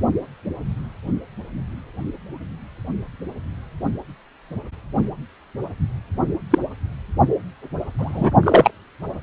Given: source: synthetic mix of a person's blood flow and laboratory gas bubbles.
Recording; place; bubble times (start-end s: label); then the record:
Doppler ultrasound of blood flow; precordium
6.50-6.58 s: bubbles
7.98-8.31 s: bubbles
8.43-8.71 s: bubbles
From the record:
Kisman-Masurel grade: 123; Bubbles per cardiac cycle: 1 to 2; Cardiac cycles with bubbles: 10 to 50%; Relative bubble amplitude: loud (0.450 to 0.775); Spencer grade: 2 (many but less than half of the cardiac periods contain bubble signals, singularly or in groups); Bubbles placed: only in the low amplitude regions of the cardiac cycle